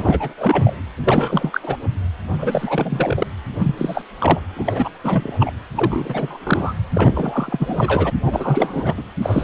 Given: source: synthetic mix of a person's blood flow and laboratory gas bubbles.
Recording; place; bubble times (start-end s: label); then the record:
Doppler ultrasound of blood flow; precordium
0.00-0.34 s: bubbles
0.38-0.76 s: bubbles
0.98-1.60 s: bubbles
1.63-1.78 s: bubbles
2.38-3.27 s: bubbles
3.61-3.75 s: bubbles
3.77-4.04 s: bubbles
4.20-4.40 s: bubbles
4.56-4.89 s: bubbles
5.04-5.52 s: bubbles
5.75-6.74 s: bubbles
6.93-8.10 s: bubbles
8.26-8.94 s: bubbles
8.97-9.03 s: bubbles
9.22-9.44 s: bubbles
From the record:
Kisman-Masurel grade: 343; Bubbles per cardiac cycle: rolling drumbeat, 9 or more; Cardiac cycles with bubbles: 100%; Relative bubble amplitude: loud (0.450 to 0.775); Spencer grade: 3 (all of the cardiac periods contain showers or single bubble signals, but not dominating or overriding the cardiac motion signals); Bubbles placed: anywhere in the cardiac cycle